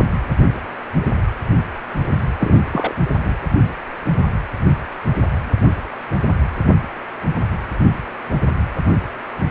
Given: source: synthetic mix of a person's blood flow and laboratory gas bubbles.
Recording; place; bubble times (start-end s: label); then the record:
Doppler ultrasound of blood flow; precordium
2.40-2.60 s: bubbles
2.71-2.94 s: bubbles
3.24-3.34 s: bubbles
From the record:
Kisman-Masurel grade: 212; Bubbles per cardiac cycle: several, 3 to 8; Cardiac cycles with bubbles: 1 to 10%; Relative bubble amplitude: moderate (0.250 to 0.450); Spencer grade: 1 (occasional bubble signal discernible with the cardiac motion signal, with majority of cardiac periods free of bubbles); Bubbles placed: anywhere in the cardiac cycle